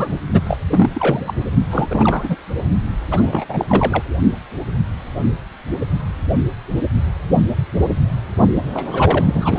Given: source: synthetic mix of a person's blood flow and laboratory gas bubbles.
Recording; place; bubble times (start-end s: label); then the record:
Doppler ultrasound of blood flow; precordium
0.00-0.16 s: bubbles
0.30-0.40 s: bubbles
0.45-0.58 s: bubbles
0.71-0.90 s: bubbles
0.94-1.33 s: bubbles
1.71-2.36 s: bubbles
3.10-3.44 s: bubbles
3.48-3.65 s: bubbles
3.69-4.04 s: bubbles
8.74-9.59 s: bubbles
From the record:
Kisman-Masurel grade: 333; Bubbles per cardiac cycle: rolling drumbeat, 9 or more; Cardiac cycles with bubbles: 50 to 99%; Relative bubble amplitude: loud (0.450 to 0.775); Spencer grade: 3 (all of the cardiac periods contain showers or single bubble signals, but not dominating or overriding the cardiac motion signals); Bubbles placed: only in the low amplitude regions of the cardiac cycle